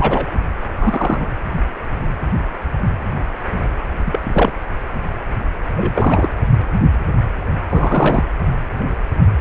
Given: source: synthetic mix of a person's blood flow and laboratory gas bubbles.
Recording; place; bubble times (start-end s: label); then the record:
Doppler ultrasound of blood flow; precordium
0.00-0.27 s: bubbles
0.77-1.26 s: bubbles
4.05-4.54 s: bubbles
5.76-5.92 s: bubbles
5.94-6.29 s: bubbles
7.69-8.24 s: bubbles
From the record:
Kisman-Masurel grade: 222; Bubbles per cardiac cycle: several, 3 to 8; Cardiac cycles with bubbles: 10 to 50%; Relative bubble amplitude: moderate (0.250 to 0.450); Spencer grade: 2 (many but less than half of the cardiac periods contain bubble signals, singularly or in groups); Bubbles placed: anywhere in the cardiac cycle